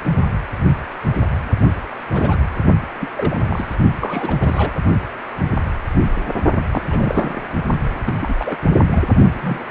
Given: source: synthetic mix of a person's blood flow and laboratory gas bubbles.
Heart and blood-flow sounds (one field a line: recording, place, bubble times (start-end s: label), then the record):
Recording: Doppler ultrasound of blood flow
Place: precordium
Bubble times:
2.13-2.37 s: bubbles
3.00-3.10 s: bubbles
3.17-3.76 s: bubbles
4.00-4.37 s: bubbles
4.41-4.73 s: bubbles
6.71-7.42 s: bubbles
8.06-8.13 s: bubbles
8.21-8.56 s: bubbles
8.91-9.01 s: bubbles
9.34-9.65 s: bubbles
From the record:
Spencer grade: 3 (all of the cardiac periods contain showers or single bubble signals, but not dominating or overriding the cardiac motion signals)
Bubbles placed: only in the low amplitude regions of the cardiac cycle